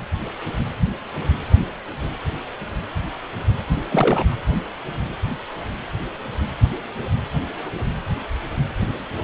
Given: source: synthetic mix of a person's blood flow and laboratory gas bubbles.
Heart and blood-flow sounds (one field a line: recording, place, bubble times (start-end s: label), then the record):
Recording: Doppler ultrasound of blood flow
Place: precordium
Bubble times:
3.88-4.36 s: bubbles
From the record:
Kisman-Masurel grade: 212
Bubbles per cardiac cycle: several, 3 to 8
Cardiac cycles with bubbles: 1 to 10%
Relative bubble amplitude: moderate (0.250 to 0.450)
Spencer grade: 1 (occasional bubble signal discernible with the cardiac motion signal, with majority of cardiac periods free of bubbles)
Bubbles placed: anywhere in the cardiac cycle